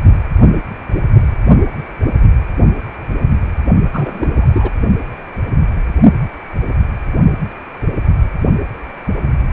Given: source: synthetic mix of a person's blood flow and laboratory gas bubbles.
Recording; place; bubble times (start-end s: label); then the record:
Doppler ultrasound of blood flow; precordium
3.93-4.70 s: bubbles
From the record:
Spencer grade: 1 (occasional bubble signal discernible with the cardiac motion signal, with majority of cardiac periods free of bubbles); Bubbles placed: only in the low amplitude regions of the cardiac cycle